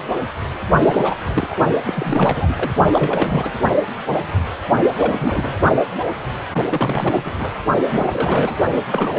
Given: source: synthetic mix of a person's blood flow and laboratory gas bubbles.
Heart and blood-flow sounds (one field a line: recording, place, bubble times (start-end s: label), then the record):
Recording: Doppler ultrasound of blood flow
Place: precordium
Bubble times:
0.86-1.57 s: bubbles
1.86-2.53 s: bubbles
2.56-2.71 s: bubbles
2.92-3.54 s: bubbles
4.97-5.61 s: bubbles
6.69-7.31 s: bubbles
7.38-7.50 s: bubbles
7.88-8.56 s: bubbles
8.88-9.19 s: bubbles
From the record:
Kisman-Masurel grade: 332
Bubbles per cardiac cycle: rolling drumbeat, 9 or more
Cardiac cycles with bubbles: 50 to 99%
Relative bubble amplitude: moderate (0.250 to 0.450)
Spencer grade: 3 (all of the cardiac periods contain showers or single bubble signals, but not dominating or overriding the cardiac motion signals)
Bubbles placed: only in the low amplitude regions of the cardiac cycle